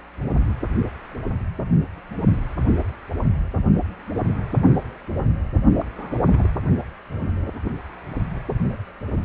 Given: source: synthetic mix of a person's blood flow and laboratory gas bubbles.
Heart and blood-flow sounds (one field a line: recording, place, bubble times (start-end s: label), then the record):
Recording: Doppler ultrasound of blood flow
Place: precordium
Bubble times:
5.79-5.88 s: bubbles
5.96-6.20 s: bubbles
6.25-6.51 s: bubbles
From the record:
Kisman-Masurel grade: 211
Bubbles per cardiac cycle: several, 3 to 8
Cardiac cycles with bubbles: 1 to 10%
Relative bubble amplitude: barely perceptible (0.100 to 0.250)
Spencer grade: 1 (occasional bubble signal discernible with the cardiac motion signal, with majority of cardiac periods free of bubbles)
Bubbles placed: only in the low amplitude regions of the cardiac cycle